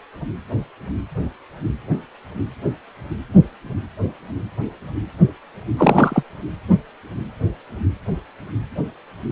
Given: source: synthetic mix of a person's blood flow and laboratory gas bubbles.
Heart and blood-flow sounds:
Doppler ultrasound of blood flow; precordium
5.76-6.23 s: bubbles
From the record:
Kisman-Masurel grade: 213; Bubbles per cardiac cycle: several, 3 to 8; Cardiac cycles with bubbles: 1 to 10%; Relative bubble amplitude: loud (0.450 to 0.775); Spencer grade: 1 (occasional bubble signal discernible with the cardiac motion signal, with majority of cardiac periods free of bubbles); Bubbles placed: anywhere in the cardiac cycle

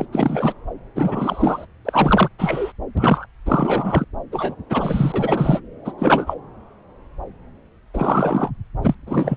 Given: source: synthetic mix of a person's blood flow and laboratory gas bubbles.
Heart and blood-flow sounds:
Doppler ultrasound of blood flow; subclavian vein
0.00-0.05 s: bubbles
0.12-0.55 s: bubbles
0.95-1.66 s: bubbles
1.85-2.29 s: bubbles
2.39-2.72 s: bubbles
2.97-3.26 s: bubbles
3.46-4.05 s: bubbles
4.31-4.55 s: bubbles
4.69-5.59 s: bubbles
5.84-5.92 s: bubbles
5.98-6.34 s: bubbles
7.94-8.50 s: bubbles
8.82-8.95 s: bubbles
9.06-9.37 s: bubbles
From the record:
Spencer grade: 3 (all of the cardiac periods contain showers or single bubble signals, but not dominating or overriding the cardiac motion signals); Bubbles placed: anywhere in the cardiac cycle

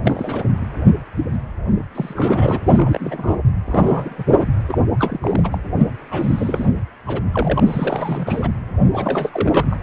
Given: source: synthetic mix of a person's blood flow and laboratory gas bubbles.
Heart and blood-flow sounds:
Doppler ultrasound of blood flow; precordium
0.00-0.45 s: bubbles
1.32-1.41 s: bubbles
1.94-2.57 s: bubbles
2.73-3.34 s: bubbles
3.67-4.25 s: bubbles
4.36-4.46 s: bubbles
4.68-4.79 s: bubbles
4.98-5.20 s: bubbles
5.22-5.58 s: bubbles
6.11-6.69 s: bubbles
7.06-7.21 s: bubbles
7.32-7.60 s: bubbles
7.67-8.51 s: bubbles
8.79-8.88 s: bubbles
8.90-9.77 s: bubbles
From the record:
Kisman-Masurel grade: 342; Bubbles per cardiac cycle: rolling drumbeat, 9 or more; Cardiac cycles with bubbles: 100%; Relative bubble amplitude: moderate (0.250 to 0.450); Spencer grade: 3 (all of the cardiac periods contain showers or single bubble signals, but not dominating or overriding the cardiac motion signals); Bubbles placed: anywhere in the cardiac cycle

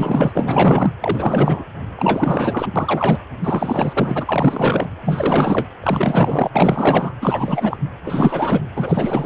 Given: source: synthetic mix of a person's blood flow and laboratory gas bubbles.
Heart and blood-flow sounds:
Doppler ultrasound of blood flow; precordium
0.00-0.32 s: bubbles
0.35-0.91 s: bubbles
1.00-1.64 s: bubbles
1.96-2.67 s: bubbles
2.75-3.18 s: bubbles
3.43-4.87 s: bubbles
5.05-5.68 s: bubbles
5.83-7.13 s: bubbles
7.21-7.77 s: bubbles
8.06-8.62 s: bubbles
8.76-9.26 s: bubbles
From the record:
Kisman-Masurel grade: 444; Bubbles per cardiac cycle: continuous sound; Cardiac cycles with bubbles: 100%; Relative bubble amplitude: maximal (0.775 to 0.999); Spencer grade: 4 (maximum detectable bubble signal sounding continuously throughout systole and diastole of every cardiac period, and overriding the amplitude of the normal cardiac signals); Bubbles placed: anywhere in the cardiac cycle

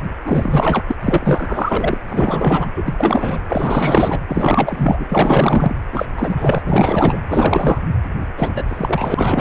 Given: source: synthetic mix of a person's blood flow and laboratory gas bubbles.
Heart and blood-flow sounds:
Doppler ultrasound of blood flow; precordium
0.25-0.84 s: bubbles
0.88-0.96 s: bubbles
1.01-1.98 s: bubbles
2.08-2.71 s: bubbles
2.76-2.94 s: bubbles
2.98-3.39 s: bubbles
3.48-4.21 s: bubbles
4.27-5.04 s: bubbles
5.09-5.76 s: bubbles
5.92-6.06 s: bubbles
6.17-6.62 s: bubbles
6.66-7.17 s: bubbles
7.28-7.79 s: bubbles
8.37-8.63 s: bubbles
8.68-9.41 s: bubbles
From the record:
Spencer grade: 4 (maximum detectable bubble signal sounding continuously throughout systole and diastole of every cardiac period, and overriding the amplitude of the normal cardiac signals); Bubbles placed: anywhere in the cardiac cycle

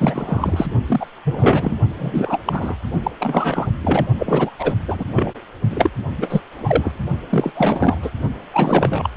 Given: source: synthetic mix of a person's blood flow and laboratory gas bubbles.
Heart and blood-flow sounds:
Doppler ultrasound of blood flow; precordium
0.00-0.67 s: bubbles
0.86-1.06 s: bubbles
1.25-1.76 s: bubbles
1.99-2.40 s: bubbles
2.44-2.75 s: bubbles
3.03-3.11 s: bubbles
3.18-3.67 s: bubbles
3.83-4.05 s: bubbles
4.18-4.51 s: bubbles
4.58-4.75 s: bubbles
4.88-5.04 s: bubbles
5.13-5.32 s: bubbles
5.70-5.89 s: bubbles
6.17-6.41 s: bubbles
6.50-6.98 s: bubbles
7.29-7.52 s: bubbles
7.55-8.11 s: bubbles
8.53-9.10 s: bubbles
From the record:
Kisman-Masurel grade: 343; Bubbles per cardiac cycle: rolling drumbeat, 9 or more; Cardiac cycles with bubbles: 100%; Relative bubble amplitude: loud (0.450 to 0.775); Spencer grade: 3 (all of the cardiac periods contain showers or single bubble signals, but not dominating or overriding the cardiac motion signals); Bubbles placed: only in the low amplitude regions of the cardiac cycle

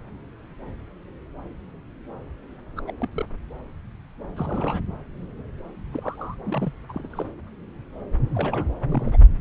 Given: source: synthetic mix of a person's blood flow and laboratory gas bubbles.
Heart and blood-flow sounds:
Doppler ultrasound of blood flow; subclavian vein
2.77-2.81 s: bubbles
2.87-2.92 s: bubbles
3.00-3.08 s: bubbles
3.12-3.26 s: bubbles
4.36-4.80 s: bubbles
5.93-6.35 s: bubbles
6.46-6.73 s: bubbles
6.89-7.32 s: bubbles
8.35-8.74 s: bubbles
8.90-9.18 s: bubbles
From the record:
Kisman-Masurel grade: 221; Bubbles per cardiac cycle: several, 3 to 8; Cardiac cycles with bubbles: 10 to 50%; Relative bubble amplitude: barely perceptible (0.100 to 0.250); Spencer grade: 2 (many but less than half of the cardiac periods contain bubble signals, singularly or in groups); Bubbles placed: anywhere in the cardiac cycle

